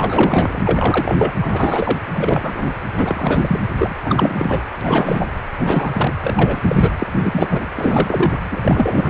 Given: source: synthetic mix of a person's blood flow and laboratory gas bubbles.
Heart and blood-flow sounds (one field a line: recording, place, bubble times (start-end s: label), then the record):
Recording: Doppler ultrasound of blood flow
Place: precordium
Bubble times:
0.00-1.33 s: bubbles
1.40-2.00 s: bubbles
2.13-2.68 s: bubbles
2.96-3.61 s: bubbles
3.78-3.95 s: bubbles
4.04-4.60 s: bubbles
4.81-5.26 s: bubbles
5.59-6.13 s: bubbles
6.22-6.61 s: bubbles
6.68-6.93 s: bubbles
6.98-7.07 s: bubbles
7.22-7.67 s: bubbles
7.75-8.38 s: bubbles
8.51-9.10 s: bubbles
From the record:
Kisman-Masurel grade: 343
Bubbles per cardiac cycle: rolling drumbeat, 9 or more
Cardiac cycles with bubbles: 100%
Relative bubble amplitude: loud (0.450 to 0.775)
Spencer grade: 3 (all of the cardiac periods contain showers or single bubble signals, but not dominating or overriding the cardiac motion signals)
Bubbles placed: anywhere in the cardiac cycle